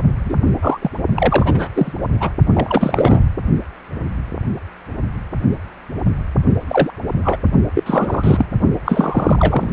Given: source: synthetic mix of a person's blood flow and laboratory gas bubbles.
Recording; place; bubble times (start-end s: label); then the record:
Doppler ultrasound of blood flow; precordium
0.25-0.35 s: bubbles
0.62-0.78 s: bubbles
0.81-0.91 s: bubbles
1.15-1.69 s: bubbles
1.75-1.92 s: bubbles
2.19-2.30 s: bubbles
2.53-3.35 s: bubbles
6.68-6.91 s: bubbles
7.24-7.37 s: bubbles
7.74-7.84 s: bubbles
7.86-8.46 s: bubbles
8.85-9.70 s: bubbles
From the record:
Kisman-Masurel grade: 233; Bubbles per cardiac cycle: several, 3 to 8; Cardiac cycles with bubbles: 50 to 99%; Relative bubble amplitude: loud (0.450 to 0.775); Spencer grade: 3 (all of the cardiac periods contain showers or single bubble signals, but not dominating or overriding the cardiac motion signals); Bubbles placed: only in the low amplitude regions of the cardiac cycle